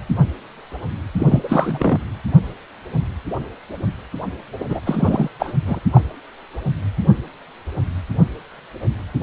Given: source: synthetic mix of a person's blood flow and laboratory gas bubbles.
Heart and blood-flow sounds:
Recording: Doppler ultrasound of blood flow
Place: precordium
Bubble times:
1.19-1.98 s: bubbles
4.60-4.64 s: bubbles
4.68-4.79 s: bubbles
4.86-5.29 s: bubbles
5.39-5.53 s: bubbles
5.65-5.79 s: bubbles
5.94-6.02 s: bubbles
From the record:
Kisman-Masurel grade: 223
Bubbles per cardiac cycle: several, 3 to 8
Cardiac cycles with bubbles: 10 to 50%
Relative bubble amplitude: loud (0.450 to 0.775)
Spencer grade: 2 (many but less than half of the cardiac periods contain bubble signals, singularly or in groups)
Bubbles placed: anywhere in the cardiac cycle

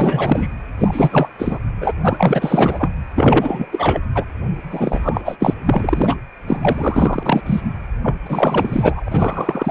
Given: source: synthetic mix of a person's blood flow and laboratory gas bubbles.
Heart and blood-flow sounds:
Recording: Doppler ultrasound of blood flow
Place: precordium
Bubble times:
0.00-0.48 s: bubbles
0.79-1.28 s: bubbles
1.39-1.59 s: bubbles
1.80-1.92 s: bubbles
2.02-2.90 s: bubbles
3.15-3.67 s: bubbles
3.71-4.01 s: bubbles
4.14-4.25 s: bubbles
4.70-5.37 s: bubbles
5.39-5.54 s: bubbles
5.65-6.17 s: bubbles
6.47-7.41 s: bubbles
7.46-7.61 s: bubbles
8.03-8.16 s: bubbles
8.26-9.09 s: bubbles
9.11-9.71 s: bubbles
From the record:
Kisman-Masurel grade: 444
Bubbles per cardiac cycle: continuous sound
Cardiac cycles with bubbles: 100%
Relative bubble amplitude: maximal (0.775 to 0.999)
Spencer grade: 4 (maximum detectable bubble signal sounding continuously throughout systole and diastole of every cardiac period, and overriding the amplitude of the normal cardiac signals)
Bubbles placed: anywhere in the cardiac cycle

